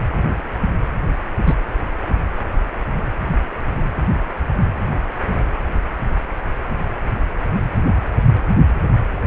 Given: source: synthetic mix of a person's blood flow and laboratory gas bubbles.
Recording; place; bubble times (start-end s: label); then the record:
Doppler ultrasound of blood flow; precordium
1.44-1.54 s: bubbles
From the record:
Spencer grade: 2 (many but less than half of the cardiac periods contain bubble signals, singularly or in groups); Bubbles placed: anywhere in the cardiac cycle